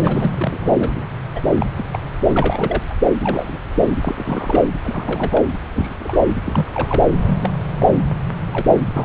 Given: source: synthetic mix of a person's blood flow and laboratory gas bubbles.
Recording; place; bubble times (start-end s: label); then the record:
Doppler ultrasound of blood flow; subclavian vein
0.01-0.30 s: bubbles
0.37-0.58 s: bubbles
0.61-0.71 s: bubbles
0.75-1.05 s: bubbles
1.35-1.40 s: bubbles
1.59-1.66 s: bubbles
1.76-1.85 s: bubbles
1.92-1.99 s: bubbles
2.25-2.82 s: bubbles
2.90-2.94 s: bubbles
3.20-3.60 s: bubbles
3.75-4.00 s: bubbles
4.03-4.63 s: bubbles
4.83-5.42 s: bubbles
5.73-5.96 s: bubbles
5.99-6.18 s: bubbles
6.44-6.70 s: bubbles
6.73-7.06 s: bubbles
7.25-7.38 s: bubbles
7.41-7.50 s: bubbles
7.76-7.90 s: bubbles
8.52-8.80 s: bubbles
8.94-9.05 s: bubbles
From the record:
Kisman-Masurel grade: 242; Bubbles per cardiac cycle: several, 3 to 8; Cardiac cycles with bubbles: 100%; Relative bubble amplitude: moderate (0.250 to 0.450); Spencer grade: 3 (all of the cardiac periods contain showers or single bubble signals, but not dominating or overriding the cardiac motion signals); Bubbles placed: anywhere in the cardiac cycle